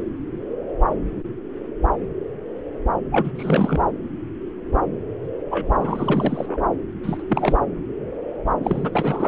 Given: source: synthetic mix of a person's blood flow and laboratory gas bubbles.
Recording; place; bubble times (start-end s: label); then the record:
Doppler ultrasound of blood flow; subclavian vein
3.11-3.31 s: bubbles
3.35-3.85 s: bubbles
5.50-5.67 s: bubbles
5.75-6.62 s: bubbles
7.03-7.22 s: bubbles
7.29-7.59 s: bubbles
8.62-9.28 s: bubbles
From the record:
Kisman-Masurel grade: 332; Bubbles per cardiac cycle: rolling drumbeat, 9 or more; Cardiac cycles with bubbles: 50 to 99%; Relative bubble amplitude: moderate (0.250 to 0.450); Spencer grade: 3 (all of the cardiac periods contain showers or single bubble signals, but not dominating or overriding the cardiac motion signals); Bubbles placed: anywhere in the cardiac cycle